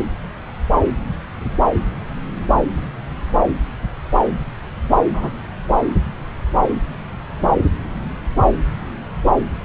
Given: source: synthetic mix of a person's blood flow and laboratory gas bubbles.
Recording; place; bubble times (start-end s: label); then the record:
Doppler ultrasound of blood flow; subclavian vein
5.13-5.29 s: bubbles
From the record:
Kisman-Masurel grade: 113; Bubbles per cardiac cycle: 1 to 2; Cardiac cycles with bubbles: 1 to 10%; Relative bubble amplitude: loud (0.450 to 0.775); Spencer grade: 1 (occasional bubble signal discernible with the cardiac motion signal, with majority of cardiac periods free of bubbles); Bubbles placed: anywhere in the cardiac cycle